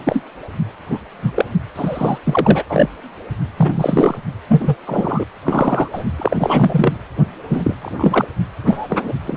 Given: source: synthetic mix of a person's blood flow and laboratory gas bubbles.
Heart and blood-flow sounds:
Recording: Doppler ultrasound of blood flow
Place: precordium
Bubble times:
0.07-0.23 s: bubbles
0.90-0.99 s: bubbles
1.22-1.46 s: bubbles
1.75-2.18 s: bubbles
2.23-2.64 s: bubbles
2.69-2.89 s: bubbles
3.57-4.18 s: bubbles
4.48-4.75 s: bubbles
4.86-5.24 s: bubbles
5.43-5.88 s: bubbles
5.93-6.04 s: bubbles
6.18-6.37 s: bubbles
6.39-6.93 s: bubbles
7.48-7.74 s: bubbles
7.79-8.25 s: bubbles
8.65-8.87 s: bubbles
8.89-9.13 s: bubbles
9.25-9.37 s: bubbles
From the record:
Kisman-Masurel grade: 243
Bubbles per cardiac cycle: several, 3 to 8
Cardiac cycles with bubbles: 100%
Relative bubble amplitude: loud (0.450 to 0.775)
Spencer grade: 3 (all of the cardiac periods contain showers or single bubble signals, but not dominating or overriding the cardiac motion signals)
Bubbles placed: anywhere in the cardiac cycle

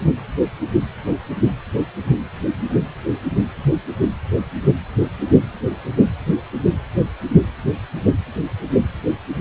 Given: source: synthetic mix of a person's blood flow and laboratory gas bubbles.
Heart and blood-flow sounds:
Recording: Doppler ultrasound of blood flow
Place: precordium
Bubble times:
no bubbles
From the record:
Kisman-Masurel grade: 000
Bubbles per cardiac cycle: 0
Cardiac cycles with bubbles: 0%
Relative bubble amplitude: no bubbles discernible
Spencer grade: 0 (complete lack of bubble signals)

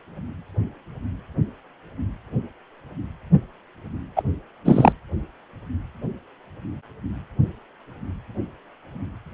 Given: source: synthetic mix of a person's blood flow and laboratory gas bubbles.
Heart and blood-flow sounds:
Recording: Doppler ultrasound of blood flow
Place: precordium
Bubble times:
4.16-4.22 s: bubbles
4.65-4.92 s: bubbles
From the record:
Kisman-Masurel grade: 223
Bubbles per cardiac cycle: several, 3 to 8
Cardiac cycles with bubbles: 10 to 50%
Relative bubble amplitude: loud (0.450 to 0.775)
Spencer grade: 2 (many but less than half of the cardiac periods contain bubble signals, singularly or in groups)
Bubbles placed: anywhere in the cardiac cycle

